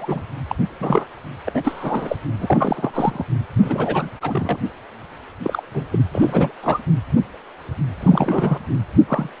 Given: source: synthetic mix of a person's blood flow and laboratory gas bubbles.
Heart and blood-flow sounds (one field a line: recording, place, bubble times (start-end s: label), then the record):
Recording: Doppler ultrasound of blood flow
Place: precordium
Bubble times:
0.00-0.23 s: bubbles
0.48-0.55 s: bubbles
0.80-1.05 s: bubbles
1.47-2.17 s: bubbles
2.40-3.24 s: bubbles
3.62-4.09 s: bubbles
4.21-4.59 s: bubbles
5.43-5.62 s: bubbles
5.74-5.85 s: bubbles
5.92-5.99 s: bubbles
6.12-6.54 s: bubbles
6.62-6.80 s: bubbles
7.99-8.58 s: bubbles
9.08-9.29 s: bubbles
From the record:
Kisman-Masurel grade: 232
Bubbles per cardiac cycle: several, 3 to 8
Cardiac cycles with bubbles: 50 to 99%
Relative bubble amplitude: moderate (0.250 to 0.450)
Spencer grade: 3 (all of the cardiac periods contain showers or single bubble signals, but not dominating or overriding the cardiac motion signals)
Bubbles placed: anywhere in the cardiac cycle